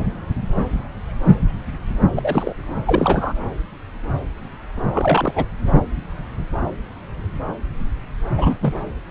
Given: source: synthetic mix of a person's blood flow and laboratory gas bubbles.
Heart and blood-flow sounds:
Doppler ultrasound of blood flow; subclavian vein
2.16-2.53 s: bubbles
2.85-3.33 s: bubbles
4.93-5.46 s: bubbles
8.37-8.55 s: bubbles
8.62-8.73 s: bubbles
From the record:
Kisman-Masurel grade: 222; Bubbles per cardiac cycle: several, 3 to 8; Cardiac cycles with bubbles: 10 to 50%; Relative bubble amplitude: moderate (0.250 to 0.450); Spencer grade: 2 (many but less than half of the cardiac periods contain bubble signals, singularly or in groups); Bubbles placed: anywhere in the cardiac cycle

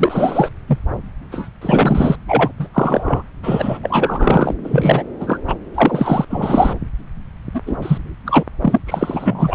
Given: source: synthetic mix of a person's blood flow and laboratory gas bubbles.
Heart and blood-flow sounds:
Doppler ultrasound of blood flow; subclavian vein
0.00-0.49 s: bubbles
0.67-0.78 s: bubbles
1.31-1.48 s: bubbles
1.61-2.16 s: bubbles
2.28-2.52 s: bubbles
2.59-2.69 s: bubbles
2.74-3.23 s: bubbles
3.43-3.79 s: bubbles
3.83-4.54 s: bubbles
4.63-5.03 s: bubbles
5.20-5.39 s: bubbles
5.47-5.54 s: bubbles
5.75-6.25 s: bubbles
6.30-6.73 s: bubbles
7.54-7.60 s: bubbles
7.66-7.77 s: bubbles
7.82-7.98 s: bubbles
8.25-8.44 s: bubbles
8.61-8.78 s: bubbles
8.87-9.55 s: bubbles
From the record:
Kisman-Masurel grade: 343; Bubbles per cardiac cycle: rolling drumbeat, 9 or more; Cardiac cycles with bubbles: 100%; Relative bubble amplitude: loud (0.450 to 0.775); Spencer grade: 3 (all of the cardiac periods contain showers or single bubble signals, but not dominating or overriding the cardiac motion signals); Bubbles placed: anywhere in the cardiac cycle

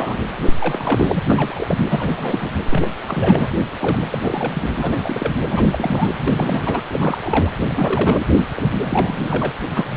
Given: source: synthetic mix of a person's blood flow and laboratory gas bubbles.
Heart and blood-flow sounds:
Doppler ultrasound of blood flow; precordium
0.00-0.18 s: bubbles
0.46-0.53 s: bubbles
0.58-1.21 s: bubbles
1.25-1.76 s: bubbles
1.88-2.50 s: bubbles
2.70-2.88 s: bubbles
3.06-3.48 s: bubbles
3.81-4.08 s: bubbles
4.11-4.18 s: bubbles
4.23-4.70 s: bubbles
4.75-5.34 s: bubbles
5.50-5.64 s: bubbles
5.71-6.14 s: bubbles
6.26-6.81 s: bubbles
6.92-7.18 s: bubbles
7.22-7.52 s: bubbles
7.62-8.19 s: bubbles
8.56-8.68 s: bubbles
8.82-9.54 s: bubbles
9.72-9.85 s: bubbles
9.91-9.97 s: bubbles
From the record:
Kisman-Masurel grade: 332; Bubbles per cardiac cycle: rolling drumbeat, 9 or more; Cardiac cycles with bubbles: 50 to 99%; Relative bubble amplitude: moderate (0.250 to 0.450); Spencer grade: 3 (all of the cardiac periods contain showers or single bubble signals, but not dominating or overriding the cardiac motion signals); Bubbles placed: anywhere in the cardiac cycle

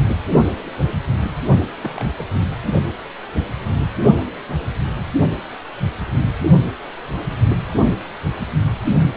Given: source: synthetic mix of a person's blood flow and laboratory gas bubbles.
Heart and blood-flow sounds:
Doppler ultrasound of blood flow; precordium
1.83-2.06 s: bubbles
2.18-2.24 s: bubbles
From the record:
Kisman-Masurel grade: 111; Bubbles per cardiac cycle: 1 to 2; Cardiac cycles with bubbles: 1 to 10%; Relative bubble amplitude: barely perceptible (0.100 to 0.250); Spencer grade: 1 (occasional bubble signal discernible with the cardiac motion signal, with majority of cardiac periods free of bubbles); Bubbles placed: only in the low amplitude regions of the cardiac cycle

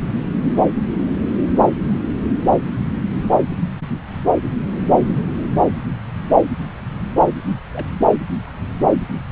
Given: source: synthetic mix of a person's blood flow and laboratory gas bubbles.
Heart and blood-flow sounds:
Doppler ultrasound of blood flow; subclavian vein
7.73-7.87 s: bubbles
From the record:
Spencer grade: 1 (occasional bubble signal discernible with the cardiac motion signal, with majority of cardiac periods free of bubbles); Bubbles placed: anywhere in the cardiac cycle

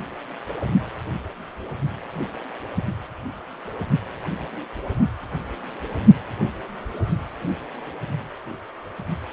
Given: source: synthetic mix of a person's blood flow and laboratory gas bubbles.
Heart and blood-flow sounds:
Doppler ultrasound of blood flow; precordium
no bubbles
From the record:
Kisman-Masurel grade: 000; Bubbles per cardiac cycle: 0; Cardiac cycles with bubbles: 0%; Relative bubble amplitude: no bubbles discernible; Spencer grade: 0 (complete lack of bubble signals)

